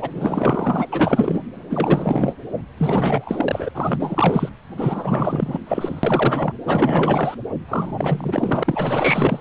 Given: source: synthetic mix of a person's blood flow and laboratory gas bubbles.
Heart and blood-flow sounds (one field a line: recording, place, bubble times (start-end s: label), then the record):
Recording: Doppler ultrasound of blood flow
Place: precordium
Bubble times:
0.00-0.10 s: bubbles
0.15-0.89 s: bubbles
0.92-1.42 s: bubbles
1.69-2.33 s: bubbles
2.77-3.69 s: bubbles
3.74-4.49 s: bubbles
4.77-5.59 s: bubbles
5.67-6.53 s: bubbles
6.67-7.35 s: bubbles
7.68-9.41 s: bubbles
From the record:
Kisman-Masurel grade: 444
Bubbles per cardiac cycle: continuous sound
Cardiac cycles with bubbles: 100%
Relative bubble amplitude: maximal (0.775 to 0.999)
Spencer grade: 4 (maximum detectable bubble signal sounding continuously throughout systole and diastole of every cardiac period, and overriding the amplitude of the normal cardiac signals)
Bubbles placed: anywhere in the cardiac cycle